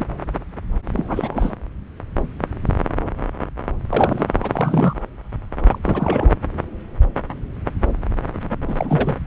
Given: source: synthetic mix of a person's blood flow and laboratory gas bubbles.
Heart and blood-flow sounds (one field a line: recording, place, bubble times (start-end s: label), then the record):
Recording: Doppler ultrasound of blood flow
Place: subclavian vein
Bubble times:
0.00-0.05 s: bubbles
0.93-1.56 s: bubbles
3.89-4.26 s: bubbles
4.43-4.94 s: bubbles
5.67-5.79 s: bubbles
5.83-6.31 s: bubbles
8.67-9.15 s: bubbles
From the record:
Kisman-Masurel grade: 222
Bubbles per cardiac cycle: several, 3 to 8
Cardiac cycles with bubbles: 10 to 50%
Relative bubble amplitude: moderate (0.250 to 0.450)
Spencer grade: 2 (many but less than half of the cardiac periods contain bubble signals, singularly or in groups)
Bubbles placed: anywhere in the cardiac cycle